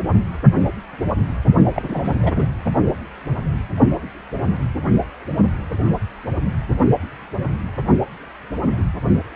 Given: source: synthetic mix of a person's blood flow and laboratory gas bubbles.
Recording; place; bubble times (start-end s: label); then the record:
Doppler ultrasound of blood flow; precordium
1.73-2.18 s: bubbles
2.22-2.31 s: bubbles
2.35-2.44 s: bubbles
From the record:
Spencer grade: 1 (occasional bubble signal discernible with the cardiac motion signal, with majority of cardiac periods free of bubbles); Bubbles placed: only in the low amplitude regions of the cardiac cycle